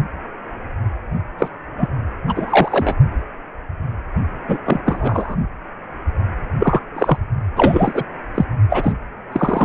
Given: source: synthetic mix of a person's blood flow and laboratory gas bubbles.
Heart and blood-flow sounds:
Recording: Doppler ultrasound of blood flow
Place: precordium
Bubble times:
1.39-1.48 s: bubbles
1.76-1.89 s: bubbles
2.27-2.95 s: bubbles
4.48-4.58 s: bubbles
4.66-4.80 s: bubbles
4.85-5.36 s: bubbles
6.59-6.80 s: bubbles
6.96-7.18 s: bubbles
7.56-8.04 s: bubbles
8.34-8.45 s: bubbles
8.70-8.92 s: bubbles
9.32-9.65 s: bubbles
From the record:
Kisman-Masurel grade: 233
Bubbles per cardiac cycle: several, 3 to 8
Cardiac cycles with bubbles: 50 to 99%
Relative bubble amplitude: loud (0.450 to 0.775)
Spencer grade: 3 (all of the cardiac periods contain showers or single bubble signals, but not dominating or overriding the cardiac motion signals)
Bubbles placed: only in the low amplitude regions of the cardiac cycle

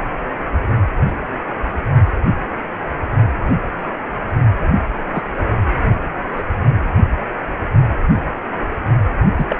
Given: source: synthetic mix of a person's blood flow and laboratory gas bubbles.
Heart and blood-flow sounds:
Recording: Doppler ultrasound of blood flow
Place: precordium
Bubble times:
5.12-5.23 s: bubbles
6.35-6.42 s: bubbles
9.37-9.46 s: bubbles
9.48-9.56 s: bubbles
From the record:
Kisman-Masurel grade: 122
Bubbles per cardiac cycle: 1 to 2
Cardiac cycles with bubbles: 10 to 50%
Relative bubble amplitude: moderate (0.250 to 0.450)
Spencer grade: 2 (many but less than half of the cardiac periods contain bubble signals, singularly or in groups)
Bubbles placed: only in the low amplitude regions of the cardiac cycle

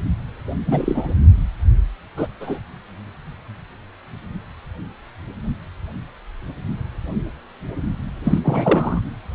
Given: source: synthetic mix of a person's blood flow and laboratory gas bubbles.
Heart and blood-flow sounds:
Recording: Doppler ultrasound of blood flow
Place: precordium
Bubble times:
0.67-1.14 s: bubbles
2.17-2.27 s: bubbles
2.41-2.60 s: bubbles
8.24-8.38 s: bubbles
8.44-9.01 s: bubbles
From the record:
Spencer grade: 2 (many but less than half of the cardiac periods contain bubble signals, singularly or in groups)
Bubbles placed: anywhere in the cardiac cycle

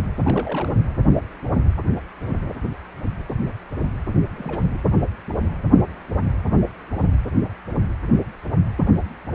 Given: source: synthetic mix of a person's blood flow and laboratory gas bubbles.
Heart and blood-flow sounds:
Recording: Doppler ultrasound of blood flow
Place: precordium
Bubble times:
0.24-0.82 s: bubbles
4.36-4.68 s: bubbles
4.74-4.77 s: bubbles
From the record:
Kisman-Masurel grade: 221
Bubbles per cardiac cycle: several, 3 to 8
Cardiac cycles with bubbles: 10 to 50%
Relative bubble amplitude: barely perceptible (0.100 to 0.250)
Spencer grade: 2 (many but less than half of the cardiac periods contain bubble signals, singularly or in groups)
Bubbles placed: anywhere in the cardiac cycle

